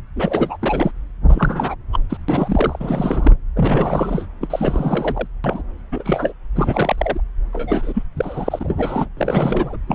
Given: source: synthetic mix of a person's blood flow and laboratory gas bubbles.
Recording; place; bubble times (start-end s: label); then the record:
Doppler ultrasound of blood flow; subclavian vein
0.15-0.57 s: bubbles
0.62-0.91 s: bubbles
1.29-1.75 s: bubbles
1.93-1.99 s: bubbles
2.10-2.17 s: bubbles
2.28-3.36 s: bubbles
3.56-4.27 s: bubbles
4.41-4.48 s: bubbles
4.50-5.28 s: bubbles
5.44-5.62 s: bubbles
5.92-6.33 s: bubbles
6.56-7.21 s: bubbles
7.53-8.03 s: bubbles
8.17-9.09 s: bubbles
9.17-9.77 s: bubbles
9.87-9.95 s: bubbles
From the record:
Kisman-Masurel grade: 342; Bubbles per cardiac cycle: rolling drumbeat, 9 or more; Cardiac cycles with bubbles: 100%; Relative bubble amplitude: moderate (0.250 to 0.450); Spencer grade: 3 (all of the cardiac periods contain showers or single bubble signals, but not dominating or overriding the cardiac motion signals); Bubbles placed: anywhere in the cardiac cycle